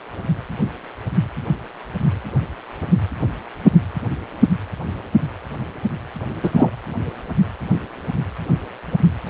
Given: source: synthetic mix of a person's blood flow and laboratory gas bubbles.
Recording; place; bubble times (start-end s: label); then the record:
Doppler ultrasound of blood flow; precordium
6.42-6.50 s: bubbles
6.55-6.70 s: bubbles
From the record:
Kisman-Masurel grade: 113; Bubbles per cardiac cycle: 1 to 2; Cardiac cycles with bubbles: 1 to 10%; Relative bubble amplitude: loud (0.450 to 0.775); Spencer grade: 1 (occasional bubble signal discernible with the cardiac motion signal, with majority of cardiac periods free of bubbles); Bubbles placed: anywhere in the cardiac cycle